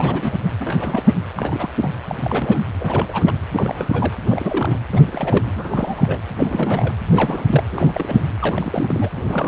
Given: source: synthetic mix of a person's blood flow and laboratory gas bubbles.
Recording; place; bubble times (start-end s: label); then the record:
Doppler ultrasound of blood flow; precordium
0.00-0.35 s: bubbles
0.60-1.14 s: bubbles
1.37-1.69 s: bubbles
1.79-1.89 s: bubbles
2.08-2.15 s: bubbles
2.20-2.60 s: bubbles
2.79-3.33 s: bubbles
3.52-4.13 s: bubbles
4.29-4.78 s: bubbles
4.91-5.02 s: bubbles
5.05-6.21 s: bubbles
6.36-6.94 s: bubbles
7.11-7.45 s: bubbles
7.50-7.63 s: bubbles
7.71-8.22 s: bubbles
8.39-9.11 s: bubbles
9.15-9.48 s: bubbles
From the record:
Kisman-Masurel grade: 332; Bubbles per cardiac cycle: rolling drumbeat, 9 or more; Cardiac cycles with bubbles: 50 to 99%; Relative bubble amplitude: moderate (0.250 to 0.450); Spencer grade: 3 (all of the cardiac periods contain showers or single bubble signals, but not dominating or overriding the cardiac motion signals); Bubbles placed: anywhere in the cardiac cycle